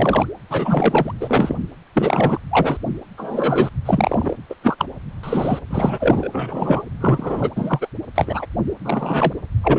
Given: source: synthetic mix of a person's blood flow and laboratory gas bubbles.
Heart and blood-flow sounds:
Doppler ultrasound of blood flow; precordium
0.00-0.26 s: bubbles
0.49-1.12 s: bubbles
1.20-1.57 s: bubbles
1.94-2.39 s: bubbles
2.50-2.77 s: bubbles
3.17-3.69 s: bubbles
3.85-4.35 s: bubbles
4.49-4.54 s: bubbles
4.62-4.75 s: bubbles
4.78-4.85 s: bubbles
5.23-5.59 s: bubbles
5.70-6.29 s: bubbles
6.33-6.83 s: bubbles
7.00-7.50 s: bubbles
7.56-7.88 s: bubbles
8.14-8.46 s: bubbles
8.85-9.33 s: bubbles
9.63-9.79 s: bubbles
From the record:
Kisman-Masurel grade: 243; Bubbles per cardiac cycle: several, 3 to 8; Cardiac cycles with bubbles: 100%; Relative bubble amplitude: loud (0.450 to 0.775); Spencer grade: 3 (all of the cardiac periods contain showers or single bubble signals, but not dominating or overriding the cardiac motion signals); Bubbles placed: anywhere in the cardiac cycle

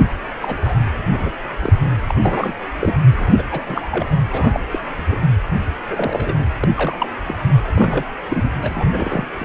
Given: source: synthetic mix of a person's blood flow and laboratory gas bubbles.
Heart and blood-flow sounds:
Doppler ultrasound of blood flow; precordium
0.41-0.56 s: bubbles
0.61-0.75 s: bubbles
1.08-1.33 s: bubbles
1.60-1.73 s: bubbles
2.08-2.15 s: bubbles
2.23-2.54 s: bubbles
2.81-2.97 s: bubbles
3.16-3.45 s: bubbles
3.51-3.61 s: bubbles
3.64-3.88 s: bubbles
3.91-4.06 s: bubbles
4.30-4.60 s: bubbles
4.71-4.79 s: bubbles
4.96-5.20 s: bubbles
5.91-6.34 s: bubbles
6.38-6.54 s: bubbles
6.60-6.68 s: bubbles
6.75-6.97 s: bubbles
7.00-7.08 s: bubbles
7.26-7.36 s: bubbles
7.65-8.04 s: bubbles
8.28-8.50 s: bubbles
8.61-9.26 s: bubbles
9.38-9.45 s: bubbles
From the record:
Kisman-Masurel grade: 242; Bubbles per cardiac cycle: several, 3 to 8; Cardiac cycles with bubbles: 100%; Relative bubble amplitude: moderate (0.250 to 0.450); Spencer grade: 3 (all of the cardiac periods contain showers or single bubble signals, but not dominating or overriding the cardiac motion signals); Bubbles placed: anywhere in the cardiac cycle

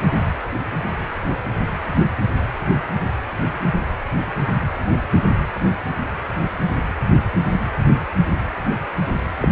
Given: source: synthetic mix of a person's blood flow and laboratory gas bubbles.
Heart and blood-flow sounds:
Doppler ultrasound of blood flow; precordium
9.39-9.48 s: bubbles
From the record:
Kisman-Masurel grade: 222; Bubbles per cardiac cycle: several, 3 to 8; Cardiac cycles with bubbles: 10 to 50%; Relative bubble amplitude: moderate (0.250 to 0.450); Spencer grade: 2 (many but less than half of the cardiac periods contain bubble signals, singularly or in groups); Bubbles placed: anywhere in the cardiac cycle

